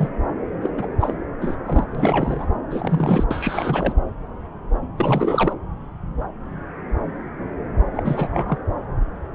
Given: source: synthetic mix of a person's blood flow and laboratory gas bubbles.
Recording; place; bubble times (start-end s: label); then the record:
Doppler ultrasound of blood flow; subclavian vein
0.00-0.10 s: bubbles
0.61-0.70 s: bubbles
0.77-0.87 s: bubbles
1.00-1.14 s: bubbles
1.41-1.57 s: bubbles
1.65-1.86 s: bubbles
1.95-2.47 s: bubbles
2.70-3.24 s: bubbles
3.30-3.95 s: bubbles
4.96-5.53 s: bubbles
7.94-8.58 s: bubbles
From the record:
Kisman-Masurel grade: 333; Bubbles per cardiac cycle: rolling drumbeat, 9 or more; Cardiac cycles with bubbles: 50 to 99%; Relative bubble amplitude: loud (0.450 to 0.775); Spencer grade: 3 (all of the cardiac periods contain showers or single bubble signals, but not dominating or overriding the cardiac motion signals); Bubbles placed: anywhere in the cardiac cycle